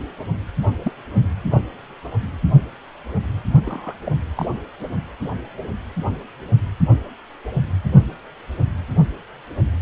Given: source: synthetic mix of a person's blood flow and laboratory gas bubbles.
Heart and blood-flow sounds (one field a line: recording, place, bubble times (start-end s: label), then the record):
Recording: Doppler ultrasound of blood flow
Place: precordium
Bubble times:
0.83-0.92 s: bubbles
1.51-1.61 s: bubbles
3.65-3.94 s: bubbles
4.04-4.12 s: bubbles
4.37-4.47 s: bubbles
From the record:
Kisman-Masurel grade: 121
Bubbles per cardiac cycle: 1 to 2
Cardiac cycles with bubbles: 10 to 50%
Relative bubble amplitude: barely perceptible (0.100 to 0.250)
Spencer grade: 2 (many but less than half of the cardiac periods contain bubble signals, singularly or in groups)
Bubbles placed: anywhere in the cardiac cycle